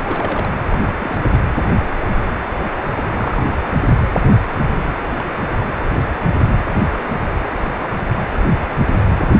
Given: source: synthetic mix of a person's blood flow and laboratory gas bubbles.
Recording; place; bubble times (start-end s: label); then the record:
Doppler ultrasound of blood flow; precordium
0.04-0.49 s: bubbles
0.69-0.78 s: bubbles
0.99-1.20 s: bubbles
1.32-1.40 s: bubbles
2.96-3.57 s: bubbles
5.18-5.22 s: bubbles
5.38-5.46 s: bubbles
5.49-5.54 s: bubbles
From the record:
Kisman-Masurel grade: 221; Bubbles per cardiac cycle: several, 3 to 8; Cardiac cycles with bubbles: 10 to 50%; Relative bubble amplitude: barely perceptible (0.100 to 0.250); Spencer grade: 2 (many but less than half of the cardiac periods contain bubble signals, singularly or in groups); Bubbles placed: anywhere in the cardiac cycle